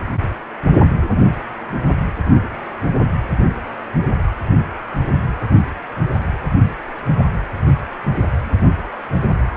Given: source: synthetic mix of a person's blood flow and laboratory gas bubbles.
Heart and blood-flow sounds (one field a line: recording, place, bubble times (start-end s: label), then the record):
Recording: Doppler ultrasound of blood flow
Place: precordium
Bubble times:
7.05-7.12 s: bubbles
7.18-7.25 s: bubbles
From the record:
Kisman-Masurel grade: 112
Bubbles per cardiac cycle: 1 to 2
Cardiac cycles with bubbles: 1 to 10%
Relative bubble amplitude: moderate (0.250 to 0.450)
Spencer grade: 1 (occasional bubble signal discernible with the cardiac motion signal, with majority of cardiac periods free of bubbles)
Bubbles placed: anywhere in the cardiac cycle